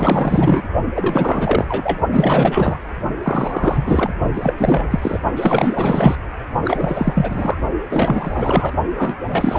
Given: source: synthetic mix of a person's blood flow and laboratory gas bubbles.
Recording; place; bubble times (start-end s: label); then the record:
Doppler ultrasound of blood flow; precordium
0.00-0.63 s: bubbles
0.94-1.65 s: bubbles
1.68-1.99 s: bubbles
2.11-2.79 s: bubbles
3.23-4.10 s: bubbles
4.33-4.54 s: bubbles
4.57-5.19 s: bubbles
5.36-6.16 s: bubbles
6.65-7.58 s: bubbles
7.91-8.74 s: bubbles
8.97-9.16 s: bubbles
9.26-9.59 s: bubbles
From the record:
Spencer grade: 4 (maximum detectable bubble signal sounding continuously throughout systole and diastole of every cardiac period, and overriding the amplitude of the normal cardiac signals); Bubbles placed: only in the low amplitude regions of the cardiac cycle